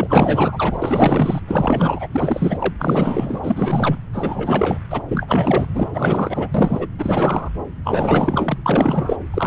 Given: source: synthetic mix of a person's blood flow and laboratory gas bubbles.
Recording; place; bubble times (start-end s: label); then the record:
Doppler ultrasound of blood flow; subclavian vein
0.00-0.78 s: bubbles
0.82-1.41 s: bubbles
1.48-2.08 s: bubbles
2.12-2.74 s: bubbles
2.79-3.99 s: bubbles
4.12-4.78 s: bubbles
4.90-5.02 s: bubbles
5.08-5.67 s: bubbles
5.74-6.48 s: bubbles
6.54-6.88 s: bubbles
6.99-7.50 s: bubbles
7.84-8.58 s: bubbles
8.65-9.17 s: bubbles
9.33-9.47 s: bubbles
From the record:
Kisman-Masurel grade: 444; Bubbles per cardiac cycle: continuous sound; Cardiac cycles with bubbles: 100%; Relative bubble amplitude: maximal (0.775 to 0.999); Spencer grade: 4 (maximum detectable bubble signal sounding continuously throughout systole and diastole of every cardiac period, and overriding the amplitude of the normal cardiac signals); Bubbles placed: anywhere in the cardiac cycle